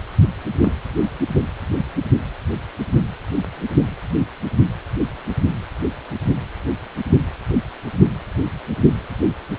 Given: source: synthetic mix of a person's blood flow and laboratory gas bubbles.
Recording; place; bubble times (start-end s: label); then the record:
Doppler ultrasound of blood flow; precordium
0.60-0.72 s: bubbles
From the record:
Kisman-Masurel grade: 112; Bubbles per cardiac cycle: 1 to 2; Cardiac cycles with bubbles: 1 to 10%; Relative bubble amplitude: moderate (0.250 to 0.450); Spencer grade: 1 (occasional bubble signal discernible with the cardiac motion signal, with majority of cardiac periods free of bubbles); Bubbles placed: only in the low amplitude regions of the cardiac cycle